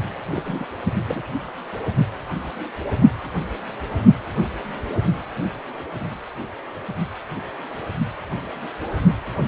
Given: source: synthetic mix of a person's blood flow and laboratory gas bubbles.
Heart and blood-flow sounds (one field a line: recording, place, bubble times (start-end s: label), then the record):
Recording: Doppler ultrasound of blood flow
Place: precordium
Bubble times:
0.34-0.67 s: bubbles
1.07-1.22 s: bubbles
From the record:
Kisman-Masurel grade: 211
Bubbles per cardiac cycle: several, 3 to 8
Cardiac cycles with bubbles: 1 to 10%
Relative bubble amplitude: barely perceptible (0.100 to 0.250)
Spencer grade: 1 (occasional bubble signal discernible with the cardiac motion signal, with majority of cardiac periods free of bubbles)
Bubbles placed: anywhere in the cardiac cycle